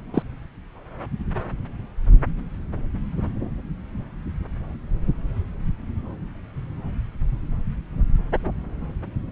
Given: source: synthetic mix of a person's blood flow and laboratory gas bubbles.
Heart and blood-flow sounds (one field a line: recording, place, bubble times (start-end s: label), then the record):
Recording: Doppler ultrasound of blood flow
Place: subclavian vein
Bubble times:
0.14-0.22 s: bubbles
From the record:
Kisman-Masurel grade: 113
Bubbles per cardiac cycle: 1 to 2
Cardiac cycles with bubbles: 1 to 10%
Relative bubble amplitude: loud (0.450 to 0.775)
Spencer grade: 1 (occasional bubble signal discernible with the cardiac motion signal, with majority of cardiac periods free of bubbles)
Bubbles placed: anywhere in the cardiac cycle